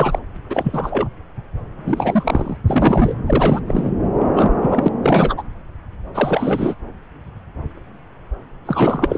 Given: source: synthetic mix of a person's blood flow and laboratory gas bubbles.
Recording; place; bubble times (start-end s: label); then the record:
Doppler ultrasound of blood flow; subclavian vein
0.00-0.19 s: bubbles
0.50-1.08 s: bubbles
1.85-2.57 s: bubbles
2.67-3.15 s: bubbles
3.26-3.60 s: bubbles
3.67-3.93 s: bubbles
4.17-4.26 s: bubbles
4.33-4.50 s: bubbles
4.61-4.88 s: bubbles
5.01-5.43 s: bubbles
6.14-6.75 s: bubbles
8.66-9.17 s: bubbles
From the record:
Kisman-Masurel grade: 333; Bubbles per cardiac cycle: rolling drumbeat, 9 or more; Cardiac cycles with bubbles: 50 to 99%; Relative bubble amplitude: loud (0.450 to 0.775); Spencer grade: 3 (all of the cardiac periods contain showers or single bubble signals, but not dominating or overriding the cardiac motion signals); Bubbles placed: anywhere in the cardiac cycle